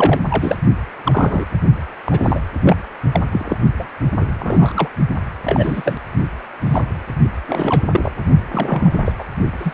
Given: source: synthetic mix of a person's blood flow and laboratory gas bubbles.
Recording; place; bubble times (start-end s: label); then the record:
Doppler ultrasound of blood flow; precordium
0.00-0.20 s: bubbles
0.30-0.56 s: bubbles
1.04-1.46 s: bubbles
2.06-2.42 s: bubbles
2.63-2.76 s: bubbles
3.11-3.22 s: bubbles
3.31-3.57 s: bubbles
3.78-3.86 s: bubbles
4.20-4.25 s: bubbles
4.39-4.88 s: bubbles
5.44-5.96 s: bubbles
6.64-6.85 s: bubbles
7.48-7.85 s: bubbles
7.92-8.11 s: bubbles
8.51-9.01 s: bubbles
9.04-9.12 s: bubbles
9.19-9.25 s: bubbles
9.59-9.74 s: bubbles
From the record:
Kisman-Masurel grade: 232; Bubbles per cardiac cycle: several, 3 to 8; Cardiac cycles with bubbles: 50 to 99%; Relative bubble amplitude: moderate (0.250 to 0.450); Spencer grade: 3 (all of the cardiac periods contain showers or single bubble signals, but not dominating or overriding the cardiac motion signals); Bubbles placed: only in the low amplitude regions of the cardiac cycle